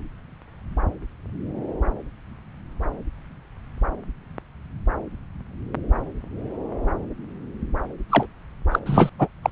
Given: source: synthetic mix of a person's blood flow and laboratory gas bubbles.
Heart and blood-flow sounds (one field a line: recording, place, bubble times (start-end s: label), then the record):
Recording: Doppler ultrasound of blood flow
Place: subclavian vein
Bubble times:
8.10-8.27 s: bubbles
8.71-8.79 s: bubbles
8.86-9.10 s: bubbles
9.19-9.28 s: bubbles
9.43-9.52 s: bubbles
From the record:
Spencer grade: 2 (many but less than half of the cardiac periods contain bubble signals, singularly or in groups)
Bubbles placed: anywhere in the cardiac cycle